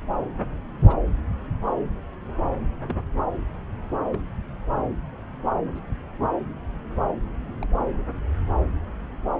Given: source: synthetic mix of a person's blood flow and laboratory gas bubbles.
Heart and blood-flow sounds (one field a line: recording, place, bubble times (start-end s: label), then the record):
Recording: Doppler ultrasound of blood flow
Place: subclavian vein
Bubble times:
0.86-0.97 s: bubbles
2.88-2.96 s: bubbles
2.98-3.01 s: bubbles
4.10-4.18 s: bubbles
5.75-5.80 s: bubbles
7.62-7.67 s: bubbles
From the record:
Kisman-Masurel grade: 121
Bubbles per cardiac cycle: 1 to 2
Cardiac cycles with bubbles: 10 to 50%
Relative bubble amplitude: barely perceptible (0.100 to 0.250)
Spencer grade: 2 (many but less than half of the cardiac periods contain bubble signals, singularly or in groups)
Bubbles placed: anywhere in the cardiac cycle